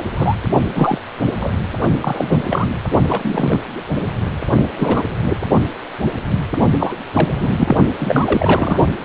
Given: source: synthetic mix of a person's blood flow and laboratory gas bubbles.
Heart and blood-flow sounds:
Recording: Doppler ultrasound of blood flow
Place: precordium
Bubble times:
0.16-0.36 s: bubbles
0.75-1.00 s: bubbles
1.40-1.52 s: bubbles
2.00-2.42 s: bubbles
2.46-2.79 s: bubbles
3.08-3.60 s: bubbles
4.76-5.03 s: bubbles
5.21-5.37 s: bubbles
6.79-6.95 s: bubbles
7.13-7.75 s: bubbles
7.99-8.87 s: bubbles
From the record:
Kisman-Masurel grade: 233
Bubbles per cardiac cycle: several, 3 to 8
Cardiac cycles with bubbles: 50 to 99%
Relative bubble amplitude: loud (0.450 to 0.775)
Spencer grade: 3 (all of the cardiac periods contain showers or single bubble signals, but not dominating or overriding the cardiac motion signals)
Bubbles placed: only in the low amplitude regions of the cardiac cycle

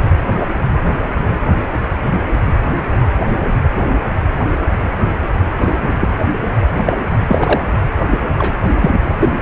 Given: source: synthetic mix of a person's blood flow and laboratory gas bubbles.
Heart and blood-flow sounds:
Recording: Doppler ultrasound of blood flow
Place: precordium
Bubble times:
5.61-5.74 s: bubbles
5.82-6.24 s: bubbles
6.75-6.93 s: bubbles
7.28-7.61 s: bubbles
8.10-8.18 s: bubbles
8.38-8.55 s: bubbles
8.80-9.00 s: bubbles
9.19-9.32 s: bubbles
From the record:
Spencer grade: 2 (many but less than half of the cardiac periods contain bubble signals, singularly or in groups)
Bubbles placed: anywhere in the cardiac cycle

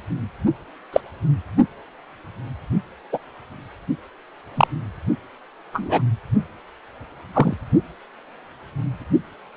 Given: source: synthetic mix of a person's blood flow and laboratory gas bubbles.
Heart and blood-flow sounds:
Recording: Doppler ultrasound of blood flow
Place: precordium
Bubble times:
0.92-1.01 s: bubbles
3.12-3.19 s: bubbles
4.55-4.67 s: bubbles
5.74-6.02 s: bubbles
7.33-7.54 s: bubbles
From the record:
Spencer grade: 2 (many but less than half of the cardiac periods contain bubble signals, singularly or in groups)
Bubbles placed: only in the low amplitude regions of the cardiac cycle

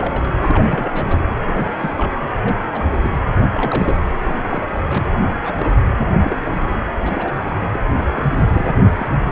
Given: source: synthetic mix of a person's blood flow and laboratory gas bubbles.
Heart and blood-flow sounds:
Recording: Doppler ultrasound of blood flow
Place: precordium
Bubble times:
0.00-0.34 s: bubbles
0.37-1.20 s: bubbles
1.45-1.92 s: bubbles
1.98-2.12 s: bubbles
2.43-2.56 s: bubbles
2.73-2.85 s: bubbles
3.04-3.10 s: bubbles
3.30-3.99 s: bubbles
4.19-4.37 s: bubbles
4.46-4.62 s: bubbles
4.75-4.82 s: bubbles
4.88-5.05 s: bubbles
5.25-5.40 s: bubbles
5.42-5.54 s: bubbles
5.58-5.69 s: bubbles
6.24-6.36 s: bubbles
6.50-6.55 s: bubbles
7.01-7.33 s: bubbles
7.71-7.79 s: bubbles
8.15-8.26 s: bubbles
8.46-8.73 s: bubbles
8.98-9.07 s: bubbles
From the record:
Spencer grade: 3 (all of the cardiac periods contain showers or single bubble signals, but not dominating or overriding the cardiac motion signals)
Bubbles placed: anywhere in the cardiac cycle

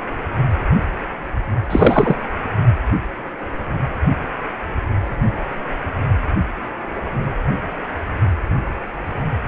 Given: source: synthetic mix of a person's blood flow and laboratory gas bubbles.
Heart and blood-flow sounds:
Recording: Doppler ultrasound of blood flow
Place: precordium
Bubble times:
1.70-2.17 s: bubbles
From the record:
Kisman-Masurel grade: 223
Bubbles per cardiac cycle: several, 3 to 8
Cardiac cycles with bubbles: 10 to 50%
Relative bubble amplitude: loud (0.450 to 0.775)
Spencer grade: 2 (many but less than half of the cardiac periods contain bubble signals, singularly or in groups)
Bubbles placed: anywhere in the cardiac cycle

